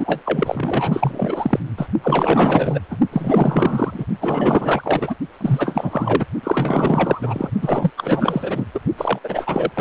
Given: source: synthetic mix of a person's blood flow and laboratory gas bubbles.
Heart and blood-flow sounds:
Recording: Doppler ultrasound of blood flow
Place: precordium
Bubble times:
0.00-1.60 s: bubbles
1.77-1.87 s: bubbles
2.02-2.79 s: bubbles
2.90-2.98 s: bubbles
3.11-4.05 s: bubbles
4.21-5.15 s: bubbles
5.41-6.26 s: bubbles
6.43-7.52 s: bubbles
7.62-7.92 s: bubbles
7.97-8.65 s: bubbles
8.74-8.79 s: bubbles
8.97-9.19 s: bubbles
9.23-9.71 s: bubbles
9.75-9.81 s: bubbles
From the record:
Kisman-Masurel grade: 444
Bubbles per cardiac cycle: continuous sound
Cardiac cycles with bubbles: 100%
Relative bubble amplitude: maximal (0.775 to 0.999)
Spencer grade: 4 (maximum detectable bubble signal sounding continuously throughout systole and diastole of every cardiac period, and overriding the amplitude of the normal cardiac signals)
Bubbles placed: only in the low amplitude regions of the cardiac cycle

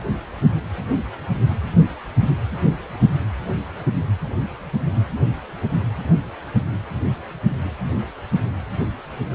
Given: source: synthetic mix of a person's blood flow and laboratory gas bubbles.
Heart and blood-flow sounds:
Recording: Doppler ultrasound of blood flow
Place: precordium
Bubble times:
no bubbles
From the record:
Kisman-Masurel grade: 000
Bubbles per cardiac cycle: 0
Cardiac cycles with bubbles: 0%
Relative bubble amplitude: no bubbles discernible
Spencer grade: 0 (complete lack of bubble signals)

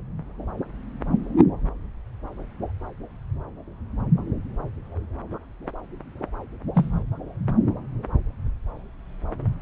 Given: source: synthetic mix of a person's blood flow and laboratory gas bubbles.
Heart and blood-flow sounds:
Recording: Doppler ultrasound of blood flow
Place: subclavian vein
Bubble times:
6.74-7.02 s: bubbles
From the record:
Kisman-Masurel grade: 112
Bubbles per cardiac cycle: 1 to 2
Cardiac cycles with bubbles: 1 to 10%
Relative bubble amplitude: moderate (0.250 to 0.450)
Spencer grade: 1 (occasional bubble signal discernible with the cardiac motion signal, with majority of cardiac periods free of bubbles)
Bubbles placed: anywhere in the cardiac cycle

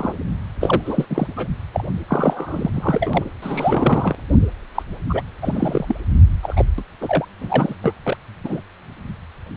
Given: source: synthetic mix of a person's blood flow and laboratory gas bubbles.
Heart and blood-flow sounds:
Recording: Doppler ultrasound of blood flow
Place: precordium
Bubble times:
0.00-0.13 s: bubbles
0.60-0.81 s: bubbles
0.84-1.05 s: bubbles
1.09-1.27 s: bubbles
1.36-1.47 s: bubbles
1.73-1.84 s: bubbles
2.08-2.70 s: bubbles
2.74-3.24 s: bubbles
3.42-4.15 s: bubbles
4.75-4.83 s: bubbles
5.09-5.21 s: bubbles
5.42-6.00 s: bubbles
6.42-6.65 s: bubbles
6.78-6.83 s: bubbles
7.01-7.25 s: bubbles
7.41-7.76 s: bubbles
7.83-7.93 s: bubbles
8.03-8.17 s: bubbles
8.44-8.61 s: bubbles
From the record:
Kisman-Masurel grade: 332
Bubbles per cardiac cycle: rolling drumbeat, 9 or more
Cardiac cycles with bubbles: 50 to 99%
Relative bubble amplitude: moderate (0.250 to 0.450)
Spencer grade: 3 (all of the cardiac periods contain showers or single bubble signals, but not dominating or overriding the cardiac motion signals)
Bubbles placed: anywhere in the cardiac cycle

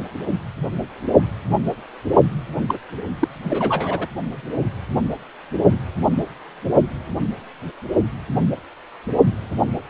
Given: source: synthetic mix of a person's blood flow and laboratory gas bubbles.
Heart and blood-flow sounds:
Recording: Doppler ultrasound of blood flow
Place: precordium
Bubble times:
2.68-2.78 s: bubbles
3.20-3.28 s: bubbles
3.43-4.08 s: bubbles
From the record:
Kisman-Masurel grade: 212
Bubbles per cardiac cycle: several, 3 to 8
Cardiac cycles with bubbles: 1 to 10%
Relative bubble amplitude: moderate (0.250 to 0.450)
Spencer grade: 1 (occasional bubble signal discernible with the cardiac motion signal, with majority of cardiac periods free of bubbles)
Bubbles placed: only in the low amplitude regions of the cardiac cycle

